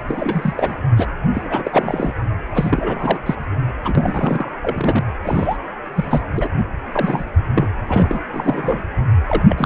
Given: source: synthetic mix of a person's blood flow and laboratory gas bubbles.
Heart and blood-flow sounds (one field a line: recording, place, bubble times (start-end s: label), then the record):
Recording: Doppler ultrasound of blood flow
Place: precordium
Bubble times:
0.08-0.75 s: bubbles
0.96-1.07 s: bubbles
1.33-1.42 s: bubbles
1.45-2.13 s: bubbles
2.54-3.19 s: bubbles
3.25-3.35 s: bubbles
3.82-4.50 s: bubbles
4.62-5.04 s: bubbles
5.23-5.57 s: bubbles
5.95-6.21 s: bubbles
6.36-6.49 s: bubbles
6.57-6.65 s: bubbles
6.92-7.25 s: bubbles
7.56-7.67 s: bubbles
7.87-8.19 s: bubbles
8.32-8.82 s: bubbles
9.27-9.42 s: bubbles
9.48-9.66 s: bubbles
From the record:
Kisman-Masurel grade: 342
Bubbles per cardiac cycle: rolling drumbeat, 9 or more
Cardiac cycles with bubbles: 100%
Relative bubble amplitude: moderate (0.250 to 0.450)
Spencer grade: 3 (all of the cardiac periods contain showers or single bubble signals, but not dominating or overriding the cardiac motion signals)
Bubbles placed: anywhere in the cardiac cycle